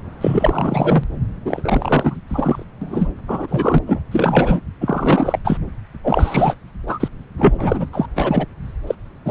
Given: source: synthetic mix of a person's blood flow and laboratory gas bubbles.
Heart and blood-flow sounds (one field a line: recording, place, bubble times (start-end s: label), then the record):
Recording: Doppler ultrasound of blood flow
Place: subclavian vein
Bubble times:
0.21-1.04 s: bubbles
1.45-2.21 s: bubbles
2.29-2.65 s: bubbles
2.81-3.10 s: bubbles
3.27-3.79 s: bubbles
3.86-4.01 s: bubbles
4.11-4.61 s: bubbles
4.80-5.39 s: bubbles
5.44-5.58 s: bubbles
6.04-6.56 s: bubbles
6.87-7.08 s: bubbles
7.38-7.86 s: bubbles
7.93-8.06 s: bubbles
8.15-8.46 s: bubbles
8.87-8.95 s: bubbles
9.24-9.31 s: bubbles
From the record:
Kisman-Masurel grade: 343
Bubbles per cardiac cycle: rolling drumbeat, 9 or more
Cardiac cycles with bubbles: 100%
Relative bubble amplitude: loud (0.450 to 0.775)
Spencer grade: 3 (all of the cardiac periods contain showers or single bubble signals, but not dominating or overriding the cardiac motion signals)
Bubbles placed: anywhere in the cardiac cycle